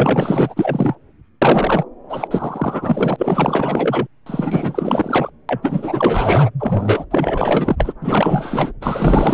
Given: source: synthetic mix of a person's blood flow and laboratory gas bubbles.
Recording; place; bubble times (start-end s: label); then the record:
Doppler ultrasound of blood flow; subclavian vein
0.00-0.95 s: bubbles
1.41-1.84 s: bubbles
2.09-2.28 s: bubbles
2.31-4.07 s: bubbles
4.26-5.30 s: bubbles
5.49-6.50 s: bubbles
6.59-7.05 s: bubbles
7.11-7.76 s: bubbles
7.79-7.93 s: bubbles
8.01-8.72 s: bubbles
8.81-9.34 s: bubbles
From the record:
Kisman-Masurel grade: 444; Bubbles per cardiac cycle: continuous sound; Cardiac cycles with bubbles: 100%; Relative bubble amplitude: maximal (0.775 to 0.999); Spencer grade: 4 (maximum detectable bubble signal sounding continuously throughout systole and diastole of every cardiac period, and overriding the amplitude of the normal cardiac signals); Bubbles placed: anywhere in the cardiac cycle